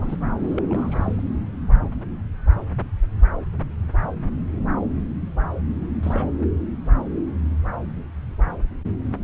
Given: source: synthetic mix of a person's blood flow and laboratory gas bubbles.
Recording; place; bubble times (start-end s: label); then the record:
Doppler ultrasound of blood flow; subclavian vein
0.00-0.16 s: bubbles
0.39-1.22 s: bubbles
5.80-5.88 s: bubbles
6.02-6.29 s: bubbles
From the record:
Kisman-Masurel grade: 221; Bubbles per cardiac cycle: several, 3 to 8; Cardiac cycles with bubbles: 10 to 50%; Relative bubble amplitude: barely perceptible (0.100 to 0.250); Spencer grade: 2 (many but less than half of the cardiac periods contain bubble signals, singularly or in groups); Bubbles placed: anywhere in the cardiac cycle